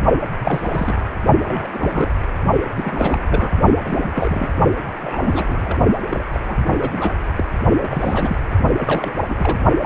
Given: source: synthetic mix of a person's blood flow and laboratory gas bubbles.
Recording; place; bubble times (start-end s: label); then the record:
Doppler ultrasound of blood flow; precordium
0.39-1.10 s: bubbles
1.44-2.10 s: bubbles
2.74-3.61 s: bubbles
3.84-4.47 s: bubbles
5.02-5.76 s: bubbles
6.09-6.24 s: bubbles
6.32-6.40 s: bubbles
6.47-6.56 s: bubbles
6.66-7.12 s: bubbles
7.36-7.44 s: bubbles
7.79-8.37 s: bubbles
8.80-9.14 s: bubbles
9.29-9.58 s: bubbles
9.82-9.86 s: bubbles
From the record:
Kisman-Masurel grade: 342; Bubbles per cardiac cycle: rolling drumbeat, 9 or more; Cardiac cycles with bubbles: 100%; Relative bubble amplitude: moderate (0.250 to 0.450); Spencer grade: 3 (all of the cardiac periods contain showers or single bubble signals, but not dominating or overriding the cardiac motion signals); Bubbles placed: only in the low amplitude regions of the cardiac cycle